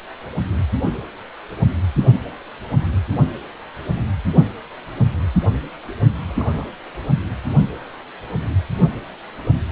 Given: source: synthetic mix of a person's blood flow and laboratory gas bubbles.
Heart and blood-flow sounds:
Doppler ultrasound of blood flow; precordium
6.27-6.66 s: bubbles
From the record:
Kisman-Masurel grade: 211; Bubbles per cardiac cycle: several, 3 to 8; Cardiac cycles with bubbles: 1 to 10%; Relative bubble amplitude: barely perceptible (0.100 to 0.250); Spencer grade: 1 (occasional bubble signal discernible with the cardiac motion signal, with majority of cardiac periods free of bubbles); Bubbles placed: only in the low amplitude regions of the cardiac cycle

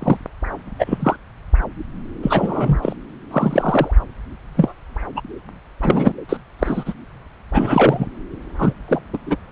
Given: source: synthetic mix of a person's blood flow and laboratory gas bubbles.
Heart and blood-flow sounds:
Doppler ultrasound of blood flow; subclavian vein
0.00-0.17 s: bubbles
0.79-1.16 s: bubbles
2.23-2.79 s: bubbles
2.82-2.93 s: bubbles
3.30-3.94 s: bubbles
4.57-4.74 s: bubbles
5.16-5.21 s: bubbles
5.82-6.13 s: bubbles
6.29-6.37 s: bubbles
6.59-6.94 s: bubbles
7.52-8.06 s: bubbles
8.58-8.74 s: bubbles
8.88-9.00 s: bubbles
9.13-9.17 s: bubbles
9.26-9.35 s: bubbles
From the record:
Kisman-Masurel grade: 243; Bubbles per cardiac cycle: several, 3 to 8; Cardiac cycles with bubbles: 100%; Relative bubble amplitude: loud (0.450 to 0.775); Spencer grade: 3 (all of the cardiac periods contain showers or single bubble signals, but not dominating or overriding the cardiac motion signals); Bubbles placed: anywhere in the cardiac cycle

